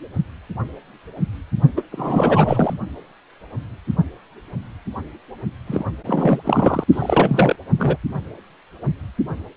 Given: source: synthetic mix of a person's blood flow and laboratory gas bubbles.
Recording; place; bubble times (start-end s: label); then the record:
Doppler ultrasound of blood flow; precordium
1.76-1.82 s: bubbles
1.91-2.74 s: bubbles
5.67-5.84 s: bubbles
6.06-6.84 s: bubbles
6.92-7.55 s: bubbles
7.78-7.97 s: bubbles
From the record:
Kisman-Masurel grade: 223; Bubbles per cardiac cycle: several, 3 to 8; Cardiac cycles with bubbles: 10 to 50%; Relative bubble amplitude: loud (0.450 to 0.775); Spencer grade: 2 (many but less than half of the cardiac periods contain bubble signals, singularly or in groups); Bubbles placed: only in the low amplitude regions of the cardiac cycle